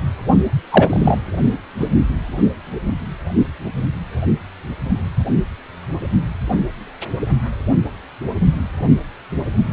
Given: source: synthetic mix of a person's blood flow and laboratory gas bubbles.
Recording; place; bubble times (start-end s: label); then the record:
Doppler ultrasound of blood flow; precordium
0.71-1.18 s: bubbles
1.79-1.90 s: bubbles
From the record:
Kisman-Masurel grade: 223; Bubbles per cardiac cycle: several, 3 to 8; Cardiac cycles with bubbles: 10 to 50%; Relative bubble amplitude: loud (0.450 to 0.775); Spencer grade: 2 (many but less than half of the cardiac periods contain bubble signals, singularly or in groups); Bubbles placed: only in the low amplitude regions of the cardiac cycle